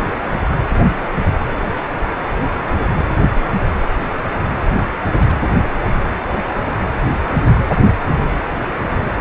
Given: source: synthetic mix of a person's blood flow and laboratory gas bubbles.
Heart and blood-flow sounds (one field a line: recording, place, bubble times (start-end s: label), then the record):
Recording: Doppler ultrasound of blood flow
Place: precordium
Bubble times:
5.18-5.38 s: bubbles
From the record:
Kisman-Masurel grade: 111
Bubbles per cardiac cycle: 1 to 2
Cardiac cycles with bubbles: 1 to 10%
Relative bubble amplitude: barely perceptible (0.100 to 0.250)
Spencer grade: 1 (occasional bubble signal discernible with the cardiac motion signal, with majority of cardiac periods free of bubbles)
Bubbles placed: anywhere in the cardiac cycle